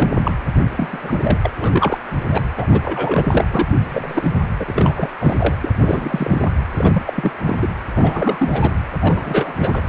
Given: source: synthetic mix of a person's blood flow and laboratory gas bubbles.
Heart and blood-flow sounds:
Doppler ultrasound of blood flow; precordium
0.00-0.13 s: bubbles
0.24-0.34 s: bubbles
0.77-1.37 s: bubbles
1.43-1.50 s: bubbles
1.53-2.00 s: bubbles
2.30-2.46 s: bubbles
2.57-2.67 s: bubbles
2.71-3.46 s: bubbles
3.53-3.67 s: bubbles
3.89-4.31 s: bubbles
4.58-5.09 s: bubbles
5.18-5.54 s: bubbles
5.63-5.69 s: bubbles
5.83-6.51 s: bubbles
6.75-7.03 s: bubbles
7.06-7.32 s: bubbles
7.43-7.57 s: bubbles
7.59-7.70 s: bubbles
7.95-8.75 s: bubbles
9.01-9.54 s: bubbles
9.58-9.82 s: bubbles
From the record:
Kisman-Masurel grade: 342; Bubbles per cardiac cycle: rolling drumbeat, 9 or more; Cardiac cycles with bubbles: 100%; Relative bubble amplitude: moderate (0.250 to 0.450); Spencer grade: 3 (all of the cardiac periods contain showers or single bubble signals, but not dominating or overriding the cardiac motion signals); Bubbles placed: anywhere in the cardiac cycle

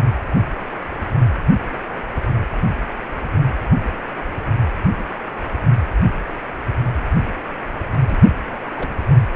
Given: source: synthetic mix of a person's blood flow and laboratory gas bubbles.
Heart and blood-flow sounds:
Doppler ultrasound of blood flow; precordium
8.08-8.32 s: bubbles
8.52-8.56 s: bubbles
8.70-8.89 s: bubbles
From the record:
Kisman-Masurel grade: 221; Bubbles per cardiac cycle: several, 3 to 8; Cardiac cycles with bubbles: 10 to 50%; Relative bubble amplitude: barely perceptible (0.100 to 0.250); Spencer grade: 2 (many but less than half of the cardiac periods contain bubble signals, singularly or in groups); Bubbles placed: anywhere in the cardiac cycle

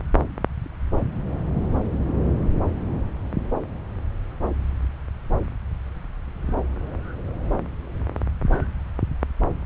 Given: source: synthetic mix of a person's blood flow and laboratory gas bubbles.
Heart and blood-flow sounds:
Doppler ultrasound of blood flow; subclavian vein
no bubbles
From the record:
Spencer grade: 0 (complete lack of bubble signals)

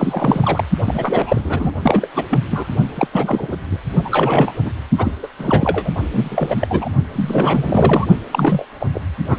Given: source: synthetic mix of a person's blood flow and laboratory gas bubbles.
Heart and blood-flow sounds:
Doppler ultrasound of blood flow; precordium
0.00-0.64 s: bubbles
0.86-1.71 s: bubbles
1.82-2.07 s: bubbles
2.14-2.26 s: bubbles
2.30-2.39 s: bubbles
2.50-2.67 s: bubbles
2.94-3.07 s: bubbles
3.13-3.56 s: bubbles
3.69-3.77 s: bubbles
4.04-4.52 s: bubbles
4.65-4.72 s: bubbles
4.98-5.12 s: bubbles
5.23-5.28 s: bubbles
5.39-5.90 s: bubbles
6.13-6.89 s: bubbles
7.13-8.06 s: bubbles
8.31-8.65 s: bubbles
8.79-8.87 s: bubbles
8.93-9.00 s: bubbles
9.29-9.38 s: bubbles
From the record:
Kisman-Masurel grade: 342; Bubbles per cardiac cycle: rolling drumbeat, 9 or more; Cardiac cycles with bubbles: 100%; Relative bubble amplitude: moderate (0.250 to 0.450); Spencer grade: 3 (all of the cardiac periods contain showers or single bubble signals, but not dominating or overriding the cardiac motion signals); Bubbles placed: only in the low amplitude regions of the cardiac cycle

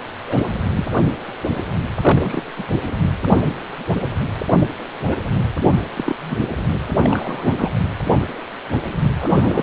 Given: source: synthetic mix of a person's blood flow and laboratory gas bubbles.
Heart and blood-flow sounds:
Doppler ultrasound of blood flow; precordium
0.27-0.48 s: bubbles
0.75-0.85 s: bubbles
2.01-2.42 s: bubbles
2.56-2.65 s: bubbles
4.47-4.58 s: bubbles
5.04-5.17 s: bubbles
5.71-5.80 s: bubbles
5.96-6.16 s: bubbles
6.30-6.36 s: bubbles
6.40-6.45 s: bubbles
7.02-7.70 s: bubbles
9.21-9.63 s: bubbles
From the record:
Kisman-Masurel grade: 232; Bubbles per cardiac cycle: several, 3 to 8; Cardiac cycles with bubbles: 50 to 99%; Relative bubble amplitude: moderate (0.250 to 0.450); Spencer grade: 3 (all of the cardiac periods contain showers or single bubble signals, but not dominating or overriding the cardiac motion signals); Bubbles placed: anywhere in the cardiac cycle

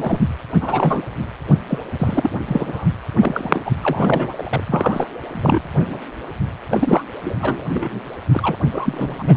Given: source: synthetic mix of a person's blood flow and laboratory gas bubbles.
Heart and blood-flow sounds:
Doppler ultrasound of blood flow; precordium
0.00-0.19 s: bubbles
0.61-1.02 s: bubbles
1.69-1.78 s: bubbles
1.99-2.30 s: bubbles
2.46-2.87 s: bubbles
3.18-3.62 s: bubbles
3.65-3.72 s: bubbles
3.82-4.32 s: bubbles
4.38-4.63 s: bubbles
4.67-5.05 s: bubbles
5.32-6.02 s: bubbles
6.70-7.02 s: bubbles
7.24-7.67 s: bubbles
7.71-8.01 s: bubbles
8.31-8.56 s: bubbles
8.71-9.37 s: bubbles
From the record:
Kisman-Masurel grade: 242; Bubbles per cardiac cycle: several, 3 to 8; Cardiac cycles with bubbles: 100%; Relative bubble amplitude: moderate (0.250 to 0.450); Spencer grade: 3 (all of the cardiac periods contain showers or single bubble signals, but not dominating or overriding the cardiac motion signals); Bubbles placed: anywhere in the cardiac cycle

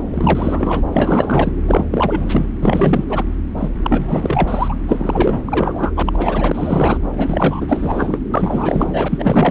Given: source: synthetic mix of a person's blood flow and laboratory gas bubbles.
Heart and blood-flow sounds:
Doppler ultrasound of blood flow; subclavian vein
0.11-0.81 s: bubbles
0.92-1.53 s: bubbles
1.67-1.85 s: bubbles
1.91-2.46 s: bubbles
2.60-3.04 s: bubbles
3.08-3.23 s: bubbles
3.57-3.70 s: bubbles
3.83-4.76 s: bubbles
4.88-5.39 s: bubbles
5.45-5.92 s: bubbles
5.96-6.98 s: bubbles
7.17-8.18 s: bubbles
8.34-9.51 s: bubbles
From the record:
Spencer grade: 4 (maximum detectable bubble signal sounding continuously throughout systole and diastole of every cardiac period, and overriding the amplitude of the normal cardiac signals); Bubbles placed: anywhere in the cardiac cycle

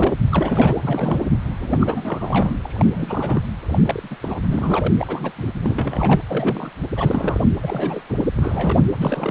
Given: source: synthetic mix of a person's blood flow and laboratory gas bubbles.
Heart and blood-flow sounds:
Doppler ultrasound of blood flow; precordium
0.00-0.16 s: bubbles
0.29-0.75 s: bubbles
0.81-1.23 s: bubbles
1.62-2.57 s: bubbles
2.61-3.40 s: bubbles
3.69-4.17 s: bubbles
4.21-4.38 s: bubbles
4.50-4.92 s: bubbles
4.98-5.32 s: bubbles
5.36-5.51 s: bubbles
5.63-6.22 s: bubbles
6.29-6.71 s: bubbles
6.96-7.39 s: bubbles
7.62-8.04 s: bubbles
8.09-8.26 s: bubbles
8.36-8.78 s: bubbles
8.98-9.31 s: bubbles
From the record:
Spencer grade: 3 (all of the cardiac periods contain showers or single bubble signals, but not dominating or overriding the cardiac motion signals); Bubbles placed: anywhere in the cardiac cycle

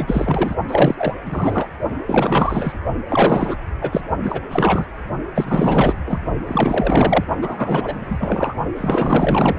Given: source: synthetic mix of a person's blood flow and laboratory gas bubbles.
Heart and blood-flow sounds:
Doppler ultrasound of blood flow; precordium
0.00-0.55 s: bubbles
0.67-1.15 s: bubbles
1.25-1.67 s: bubbles
2.06-2.73 s: bubbles
3.08-3.56 s: bubbles
3.81-4.01 s: bubbles
4.22-4.41 s: bubbles
4.50-4.87 s: bubbles
5.35-5.95 s: bubbles
6.06-6.19 s: bubbles
6.47-7.24 s: bubbles
7.42-8.54 s: bubbles
8.74-9.59 s: bubbles
From the record:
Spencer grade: 4 (maximum detectable bubble signal sounding continuously throughout systole and diastole of every cardiac period, and overriding the amplitude of the normal cardiac signals); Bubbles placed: only in the low amplitude regions of the cardiac cycle

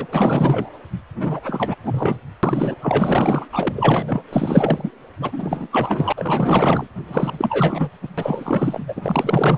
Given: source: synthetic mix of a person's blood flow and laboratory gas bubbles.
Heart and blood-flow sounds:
Doppler ultrasound of blood flow; precordium
0.00-0.06 s: bubbles
0.12-0.70 s: bubbles
1.19-1.40 s: bubbles
1.46-1.75 s: bubbles
1.85-2.19 s: bubbles
2.43-2.75 s: bubbles
2.81-3.46 s: bubbles
3.52-4.22 s: bubbles
4.30-4.91 s: bubbles
5.21-5.67 s: bubbles
5.71-6.12 s: bubbles
6.17-6.88 s: bubbles
7.08-7.90 s: bubbles
8.02-8.08 s: bubbles
8.18-8.79 s: bubbles
8.88-9.58 s: bubbles
From the record:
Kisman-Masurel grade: 444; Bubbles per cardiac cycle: continuous sound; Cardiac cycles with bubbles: 100%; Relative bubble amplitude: maximal (0.775 to 0.999); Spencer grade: 4 (maximum detectable bubble signal sounding continuously throughout systole and diastole of every cardiac period, and overriding the amplitude of the normal cardiac signals); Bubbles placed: anywhere in the cardiac cycle

